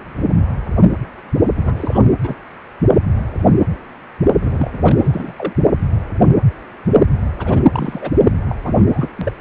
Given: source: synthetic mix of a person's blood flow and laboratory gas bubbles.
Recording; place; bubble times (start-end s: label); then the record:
Doppler ultrasound of blood flow; precordium
1.56-2.00 s: bubbles
2.23-2.35 s: bubbles
4.42-4.78 s: bubbles
4.83-5.33 s: bubbles
5.36-5.53 s: bubbles
7.38-7.63 s: bubbles
7.72-8.11 s: bubbles
8.49-8.55 s: bubbles
8.63-8.75 s: bubbles
8.78-8.86 s: bubbles
8.92-9.09 s: bubbles
9.17-9.32 s: bubbles
From the record:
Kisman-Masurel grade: 232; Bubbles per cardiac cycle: several, 3 to 8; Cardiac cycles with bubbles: 50 to 99%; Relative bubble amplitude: moderate (0.250 to 0.450); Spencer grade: 3 (all of the cardiac periods contain showers or single bubble signals, but not dominating or overriding the cardiac motion signals); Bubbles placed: only in the low amplitude regions of the cardiac cycle